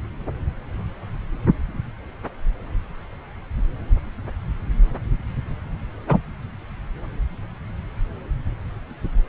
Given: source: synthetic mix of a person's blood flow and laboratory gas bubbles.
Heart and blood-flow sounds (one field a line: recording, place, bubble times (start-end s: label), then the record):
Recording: Doppler ultrasound of blood flow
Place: subclavian vein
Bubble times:
6.08-6.19 s: bubbles
From the record:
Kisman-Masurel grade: 113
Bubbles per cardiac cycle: 1 to 2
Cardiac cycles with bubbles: 1 to 10%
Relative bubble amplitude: loud (0.450 to 0.775)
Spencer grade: 1 (occasional bubble signal discernible with the cardiac motion signal, with majority of cardiac periods free of bubbles)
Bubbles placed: anywhere in the cardiac cycle